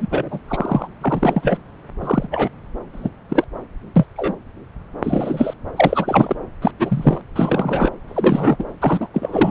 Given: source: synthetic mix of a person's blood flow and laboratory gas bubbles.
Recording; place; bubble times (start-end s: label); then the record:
Doppler ultrasound of blood flow; subclavian vein
0.00-0.40 s: bubbles
0.48-0.88 s: bubbles
1.01-1.57 s: bubbles
2.00-2.27 s: bubbles
2.30-2.49 s: bubbles
2.92-3.09 s: bubbles
3.29-3.44 s: bubbles
3.95-4.05 s: bubbles
4.16-4.34 s: bubbles
5.03-5.54 s: bubbles
5.76-6.36 s: bubbles
6.62-6.71 s: bubbles
6.79-7.21 s: bubbles
7.36-7.90 s: bubbles
8.07-8.56 s: bubbles
8.59-8.64 s: bubbles
8.80-9.09 s: bubbles
9.13-9.51 s: bubbles
From the record:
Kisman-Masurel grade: 243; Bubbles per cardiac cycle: several, 3 to 8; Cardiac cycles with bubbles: 100%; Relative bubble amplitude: loud (0.450 to 0.775); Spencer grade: 3 (all of the cardiac periods contain showers or single bubble signals, but not dominating or overriding the cardiac motion signals); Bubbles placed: anywhere in the cardiac cycle